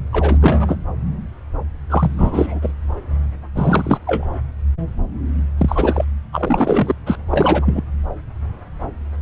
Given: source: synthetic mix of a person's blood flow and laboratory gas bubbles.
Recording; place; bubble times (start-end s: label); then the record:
Doppler ultrasound of blood flow; subclavian vein
0.12-0.79 s: bubbles
1.90-2.73 s: bubbles
3.54-3.98 s: bubbles
4.07-4.27 s: bubbles
5.58-6.04 s: bubbles
6.32-6.95 s: bubbles
7.06-7.17 s: bubbles
7.31-7.82 s: bubbles
From the record:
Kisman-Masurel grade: 233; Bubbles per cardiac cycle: several, 3 to 8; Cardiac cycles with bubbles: 50 to 99%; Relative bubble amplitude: loud (0.450 to 0.775); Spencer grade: 3 (all of the cardiac periods contain showers or single bubble signals, but not dominating or overriding the cardiac motion signals); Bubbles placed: anywhere in the cardiac cycle